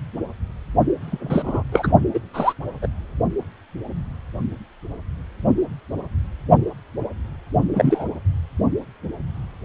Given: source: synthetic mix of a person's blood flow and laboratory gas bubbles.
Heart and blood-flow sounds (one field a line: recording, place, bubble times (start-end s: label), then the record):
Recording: Doppler ultrasound of blood flow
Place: precordium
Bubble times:
1.01-1.63 s: bubbles
1.72-1.92 s: bubbles
2.13-2.19 s: bubbles
2.33-2.53 s: bubbles
2.82-2.88 s: bubbles
7.74-8.05 s: bubbles
From the record:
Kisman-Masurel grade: 223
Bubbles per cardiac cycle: several, 3 to 8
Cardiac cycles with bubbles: 10 to 50%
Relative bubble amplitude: loud (0.450 to 0.775)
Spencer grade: 2 (many but less than half of the cardiac periods contain bubble signals, singularly or in groups)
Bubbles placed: only in the low amplitude regions of the cardiac cycle